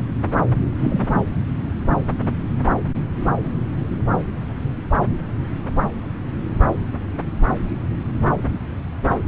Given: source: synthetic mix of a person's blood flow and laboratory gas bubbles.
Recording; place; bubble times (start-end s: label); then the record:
Doppler ultrasound of blood flow; subclavian vein
0.80-1.22 s: bubbles
From the record:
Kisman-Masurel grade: 113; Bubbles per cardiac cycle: 1 to 2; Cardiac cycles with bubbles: 1 to 10%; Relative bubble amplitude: loud (0.450 to 0.775); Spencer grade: 1 (occasional bubble signal discernible with the cardiac motion signal, with majority of cardiac periods free of bubbles); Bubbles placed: anywhere in the cardiac cycle